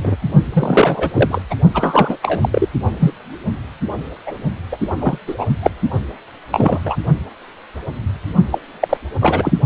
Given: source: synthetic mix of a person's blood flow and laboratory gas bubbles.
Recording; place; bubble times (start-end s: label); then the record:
Doppler ultrasound of blood flow; precordium
0.03-0.16 s: bubbles
0.53-1.42 s: bubbles
1.50-1.55 s: bubbles
1.74-2.17 s: bubbles
2.22-2.49 s: bubbles
2.52-2.67 s: bubbles
3.00-3.12 s: bubbles
4.25-4.33 s: bubbles
4.72-4.78 s: bubbles
4.92-5.34 s: bubbles
5.38-5.46 s: bubbles
5.62-5.71 s: bubbles
6.51-6.79 s: bubbles
6.84-6.97 s: bubbles
8.51-8.58 s: bubbles
8.80-8.97 s: bubbles
9.21-9.52 s: bubbles
From the record:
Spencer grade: 3 (all of the cardiac periods contain showers or single bubble signals, but not dominating or overriding the cardiac motion signals); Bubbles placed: only in the low amplitude regions of the cardiac cycle